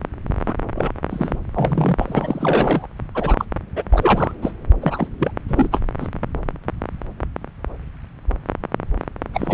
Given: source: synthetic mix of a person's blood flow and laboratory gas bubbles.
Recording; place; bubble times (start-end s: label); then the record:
Doppler ultrasound of blood flow; subclavian vein
0.47-0.54 s: bubbles
0.75-0.91 s: bubbles
1.10-1.38 s: bubbles
1.54-2.87 s: bubbles
3.15-3.45 s: bubbles
3.76-3.83 s: bubbles
3.91-4.35 s: bubbles
4.42-4.52 s: bubbles
4.82-5.07 s: bubbles
5.18-5.31 s: bubbles
5.48-5.68 s: bubbles
5.71-5.80 s: bubbles
6.00-6.08 s: bubbles
9.33-9.54 s: bubbles
From the record:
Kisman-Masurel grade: 332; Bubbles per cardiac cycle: rolling drumbeat, 9 or more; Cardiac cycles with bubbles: 50 to 99%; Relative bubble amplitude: moderate (0.250 to 0.450); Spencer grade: 3 (all of the cardiac periods contain showers or single bubble signals, but not dominating or overriding the cardiac motion signals); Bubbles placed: anywhere in the cardiac cycle